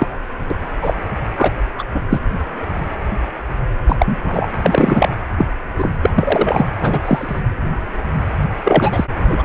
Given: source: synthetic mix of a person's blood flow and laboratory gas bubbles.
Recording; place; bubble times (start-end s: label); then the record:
Doppler ultrasound of blood flow; precordium
0.00-0.17 s: bubbles
0.50-0.55 s: bubbles
0.82-0.94 s: bubbles
1.37-1.50 s: bubbles
1.78-1.84 s: bubbles
1.94-2.02 s: bubbles
2.10-2.20 s: bubbles
3.88-3.96 s: bubbles
3.98-4.16 s: bubbles
4.23-4.46 s: bubbles
4.63-5.08 s: bubbles
5.38-5.46 s: bubbles
5.78-5.90 s: bubbles
6.02-6.10 s: bubbles
6.15-6.66 s: bubbles
6.80-7.42 s: bubbles
8.64-9.04 s: bubbles
9.25-9.43 s: bubbles
From the record:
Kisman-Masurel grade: 233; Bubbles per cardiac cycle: several, 3 to 8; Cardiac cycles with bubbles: 50 to 99%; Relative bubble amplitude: loud (0.450 to 0.775); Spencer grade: 3 (all of the cardiac periods contain showers or single bubble signals, but not dominating or overriding the cardiac motion signals); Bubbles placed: anywhere in the cardiac cycle